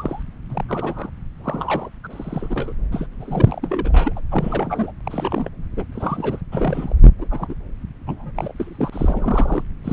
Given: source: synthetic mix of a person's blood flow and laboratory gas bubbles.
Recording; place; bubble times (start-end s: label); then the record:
Doppler ultrasound of blood flow; subclavian vein
0.00-0.23 s: bubbles
0.50-0.64 s: bubbles
0.68-1.10 s: bubbles
1.44-1.90 s: bubbles
2.04-2.07 s: bubbles
2.10-2.73 s: bubbles
2.92-3.07 s: bubbles
3.20-4.21 s: bubbles
4.31-4.92 s: bubbles
5.04-5.49 s: bubbles
5.76-5.84 s: bubbles
5.92-6.41 s: bubbles
6.51-6.96 s: bubbles
7.18-7.27 s: bubbles
7.30-7.54 s: bubbles
8.07-8.32 s: bubbles
8.36-8.53 s: bubbles
8.56-9.63 s: bubbles
9.84-9.93 s: bubbles
From the record:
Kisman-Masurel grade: 242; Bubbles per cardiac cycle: several, 3 to 8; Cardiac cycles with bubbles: 100%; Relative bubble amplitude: moderate (0.250 to 0.450); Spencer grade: 3 (all of the cardiac periods contain showers or single bubble signals, but not dominating or overriding the cardiac motion signals); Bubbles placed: anywhere in the cardiac cycle